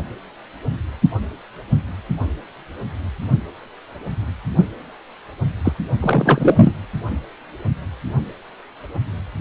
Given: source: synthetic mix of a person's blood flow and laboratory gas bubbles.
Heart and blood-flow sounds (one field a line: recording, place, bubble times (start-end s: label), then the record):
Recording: Doppler ultrasound of blood flow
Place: precordium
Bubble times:
5.64-5.72 s: bubbles
6.00-6.76 s: bubbles
From the record:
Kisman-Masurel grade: 223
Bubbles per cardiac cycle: several, 3 to 8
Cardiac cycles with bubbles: 10 to 50%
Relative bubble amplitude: loud (0.450 to 0.775)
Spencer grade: 2 (many but less than half of the cardiac periods contain bubble signals, singularly or in groups)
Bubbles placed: anywhere in the cardiac cycle